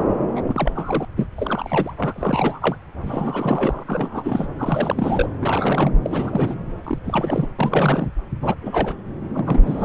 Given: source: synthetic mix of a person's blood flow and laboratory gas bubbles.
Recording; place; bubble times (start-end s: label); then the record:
Doppler ultrasound of blood flow; subclavian vein
0.00-0.06 s: bubbles
0.35-0.44 s: bubbles
0.46-1.05 s: bubbles
1.17-1.27 s: bubbles
1.36-1.95 s: bubbles
1.97-2.12 s: bubbles
2.15-2.76 s: bubbles
3.04-4.47 s: bubbles
4.58-5.29 s: bubbles
5.42-5.92 s: bubbles
6.02-6.55 s: bubbles
6.83-6.98 s: bubbles
7.04-7.49 s: bubbles
7.58-8.09 s: bubbles
8.41-8.54 s: bubbles
8.62-8.96 s: bubbles
9.35-9.85 s: bubbles
From the record:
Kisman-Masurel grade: 342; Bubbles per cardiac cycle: rolling drumbeat, 9 or more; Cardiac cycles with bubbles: 100%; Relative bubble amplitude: moderate (0.250 to 0.450); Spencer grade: 3 (all of the cardiac periods contain showers or single bubble signals, but not dominating or overriding the cardiac motion signals); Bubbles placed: anywhere in the cardiac cycle